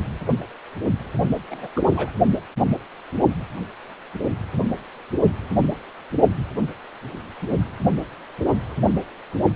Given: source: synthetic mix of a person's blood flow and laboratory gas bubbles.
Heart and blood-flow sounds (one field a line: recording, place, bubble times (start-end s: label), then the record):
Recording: Doppler ultrasound of blood flow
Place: precordium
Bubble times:
1.50-1.69 s: bubbles
1.75-1.82 s: bubbles
1.90-2.10 s: bubbles
From the record:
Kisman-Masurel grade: 211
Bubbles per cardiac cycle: several, 3 to 8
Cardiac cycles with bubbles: 1 to 10%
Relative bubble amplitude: barely perceptible (0.100 to 0.250)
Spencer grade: 1 (occasional bubble signal discernible with the cardiac motion signal, with majority of cardiac periods free of bubbles)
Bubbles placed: only in the low amplitude regions of the cardiac cycle